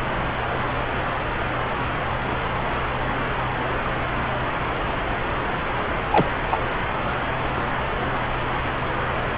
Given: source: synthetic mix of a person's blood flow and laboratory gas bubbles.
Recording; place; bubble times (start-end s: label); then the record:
Doppler ultrasound of blood flow; subclavian vein
6.12-6.31 s: bubbles
6.50-6.60 s: bubbles
From the record:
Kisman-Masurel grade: 112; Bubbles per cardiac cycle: 1 to 2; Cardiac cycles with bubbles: 1 to 10%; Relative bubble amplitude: moderate (0.250 to 0.450); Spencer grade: 1 (occasional bubble signal discernible with the cardiac motion signal, with majority of cardiac periods free of bubbles); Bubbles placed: anywhere in the cardiac cycle